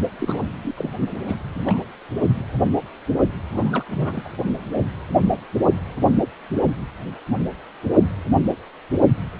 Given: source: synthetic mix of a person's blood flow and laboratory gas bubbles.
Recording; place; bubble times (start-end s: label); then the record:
Doppler ultrasound of blood flow; precordium
0.18-0.45 s: bubbles
0.62-0.92 s: bubbles
1.26-1.37 s: bubbles
1.55-1.60 s: bubbles
1.66-1.78 s: bubbles
3.51-3.84 s: bubbles
3.92-4.33 s: bubbles
From the record:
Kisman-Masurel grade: 221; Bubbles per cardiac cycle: several, 3 to 8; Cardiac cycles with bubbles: 10 to 50%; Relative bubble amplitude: barely perceptible (0.100 to 0.250); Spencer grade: 2 (many but less than half of the cardiac periods contain bubble signals, singularly or in groups); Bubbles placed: only in the low amplitude regions of the cardiac cycle